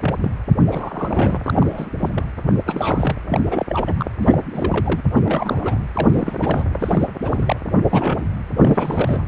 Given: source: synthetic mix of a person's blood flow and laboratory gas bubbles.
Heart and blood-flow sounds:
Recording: Doppler ultrasound of blood flow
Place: precordium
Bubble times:
0.00-0.15 s: bubbles
0.21-0.32 s: bubbles
0.70-1.43 s: bubbles
1.47-1.90 s: bubbles
2.00-2.10 s: bubbles
2.14-2.24 s: bubbles
2.66-3.17 s: bubbles
3.27-3.66 s: bubbles
3.69-4.06 s: bubbles
4.18-4.40 s: bubbles
4.54-5.02 s: bubbles
5.16-5.20 s: bubbles
5.25-5.82 s: bubbles
5.93-6.37 s: bubbles
6.42-6.64 s: bubbles
6.80-7.08 s: bubbles
7.21-7.57 s: bubbles
7.90-8.27 s: bubbles
8.56-9.22 s: bubbles
From the record:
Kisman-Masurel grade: 342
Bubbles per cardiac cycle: rolling drumbeat, 9 or more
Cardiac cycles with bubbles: 100%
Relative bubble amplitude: moderate (0.250 to 0.450)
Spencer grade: 3 (all of the cardiac periods contain showers or single bubble signals, but not dominating or overriding the cardiac motion signals)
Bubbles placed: anywhere in the cardiac cycle

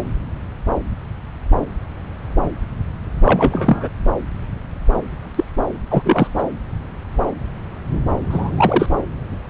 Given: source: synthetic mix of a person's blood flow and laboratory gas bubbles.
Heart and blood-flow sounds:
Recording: Doppler ultrasound of blood flow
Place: subclavian vein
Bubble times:
3.23-3.88 s: bubbles
5.35-5.44 s: bubbles
5.90-6.28 s: bubbles
6.38-6.42 s: bubbles
8.29-8.51 s: bubbles
8.56-8.87 s: bubbles
From the record:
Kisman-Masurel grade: 223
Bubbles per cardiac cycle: several, 3 to 8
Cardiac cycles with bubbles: 10 to 50%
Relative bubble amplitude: loud (0.450 to 0.775)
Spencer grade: 2 (many but less than half of the cardiac periods contain bubble signals, singularly or in groups)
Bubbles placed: anywhere in the cardiac cycle

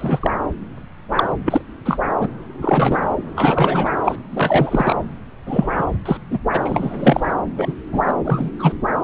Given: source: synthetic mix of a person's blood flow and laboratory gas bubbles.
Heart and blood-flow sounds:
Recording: Doppler ultrasound of blood flow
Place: subclavian vein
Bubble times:
0.00-0.31 s: bubbles
1.11-1.34 s: bubbles
1.45-1.61 s: bubbles
1.85-1.97 s: bubbles
2.19-2.29 s: bubbles
2.61-3.08 s: bubbles
3.36-3.90 s: bubbles
4.04-4.15 s: bubbles
4.31-4.96 s: bubbles
5.46-5.85 s: bubbles
6.05-6.17 s: bubbles
6.30-6.38 s: bubbles
6.51-7.34 s: bubbles
7.56-7.73 s: bubbles
7.91-8.02 s: bubbles
8.07-8.13 s: bubbles
8.24-8.50 s: bubbles
8.59-8.75 s: bubbles
From the record:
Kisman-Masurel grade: 243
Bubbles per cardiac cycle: several, 3 to 8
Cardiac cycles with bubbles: 100%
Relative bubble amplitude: loud (0.450 to 0.775)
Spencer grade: 3 (all of the cardiac periods contain showers or single bubble signals, but not dominating or overriding the cardiac motion signals)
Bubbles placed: anywhere in the cardiac cycle

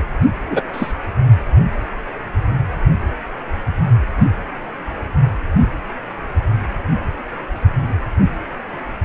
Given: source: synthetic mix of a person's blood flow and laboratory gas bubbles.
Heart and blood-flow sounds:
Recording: Doppler ultrasound of blood flow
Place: precordium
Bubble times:
0.50-0.62 s: bubbles
0.73-0.94 s: bubbles
From the record:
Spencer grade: 1 (occasional bubble signal discernible with the cardiac motion signal, with majority of cardiac periods free of bubbles)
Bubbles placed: anywhere in the cardiac cycle

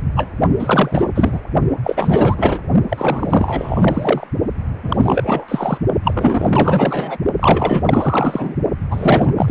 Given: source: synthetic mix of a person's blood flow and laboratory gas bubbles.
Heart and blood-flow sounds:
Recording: Doppler ultrasound of blood flow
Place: precordium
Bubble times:
0.16-0.33 s: bubbles
0.58-1.07 s: bubbles
1.15-1.41 s: bubbles
1.83-2.59 s: bubbles
2.88-4.28 s: bubbles
4.83-5.78 s: bubbles
6.04-7.17 s: bubbles
7.39-7.83 s: bubbles
7.86-8.56 s: bubbles
8.91-9.51 s: bubbles
From the record:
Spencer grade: 4 (maximum detectable bubble signal sounding continuously throughout systole and diastole of every cardiac period, and overriding the amplitude of the normal cardiac signals)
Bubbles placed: only in the low amplitude regions of the cardiac cycle

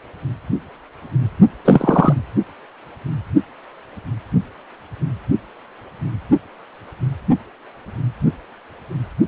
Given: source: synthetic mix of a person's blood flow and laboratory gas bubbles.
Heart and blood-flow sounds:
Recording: Doppler ultrasound of blood flow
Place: precordium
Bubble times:
1.65-2.13 s: bubbles
From the record:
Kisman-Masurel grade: 213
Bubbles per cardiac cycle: several, 3 to 8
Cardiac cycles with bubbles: 1 to 10%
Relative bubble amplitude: loud (0.450 to 0.775)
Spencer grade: 1 (occasional bubble signal discernible with the cardiac motion signal, with majority of cardiac periods free of bubbles)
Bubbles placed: only in the low amplitude regions of the cardiac cycle

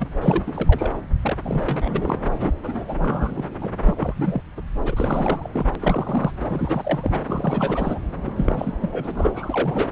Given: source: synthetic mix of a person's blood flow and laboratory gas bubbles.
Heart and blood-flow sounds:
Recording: Doppler ultrasound of blood flow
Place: subclavian vein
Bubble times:
0.00-0.09 s: bubbles
0.21-0.43 s: bubbles
0.46-0.92 s: bubbles
1.22-1.36 s: bubbles
1.42-2.17 s: bubbles
2.34-2.52 s: bubbles
2.63-2.84 s: bubbles
2.88-3.45 s: bubbles
3.60-3.71 s: bubbles
3.87-4.42 s: bubbles
4.57-4.62 s: bubbles
4.85-5.50 s: bubbles
5.53-5.66 s: bubbles
5.75-5.77 s: bubbles
5.81-6.32 s: bubbles
6.49-7.23 s: bubbles
7.26-7.99 s: bubbles
8.26-8.31 s: bubbles
8.36-8.73 s: bubbles
8.82-9.12 s: bubbles
9.15-9.89 s: bubbles
From the record:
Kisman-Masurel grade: 342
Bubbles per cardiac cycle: rolling drumbeat, 9 or more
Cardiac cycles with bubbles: 100%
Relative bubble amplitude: moderate (0.250 to 0.450)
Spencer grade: 3 (all of the cardiac periods contain showers or single bubble signals, but not dominating or overriding the cardiac motion signals)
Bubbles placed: anywhere in the cardiac cycle

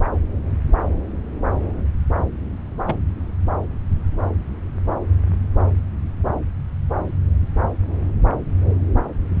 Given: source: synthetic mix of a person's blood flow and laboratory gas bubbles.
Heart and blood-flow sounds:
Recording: Doppler ultrasound of blood flow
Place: subclavian vein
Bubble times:
2.86-2.96 s: bubbles
From the record:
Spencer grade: 1 (occasional bubble signal discernible with the cardiac motion signal, with majority of cardiac periods free of bubbles)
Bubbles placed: anywhere in the cardiac cycle

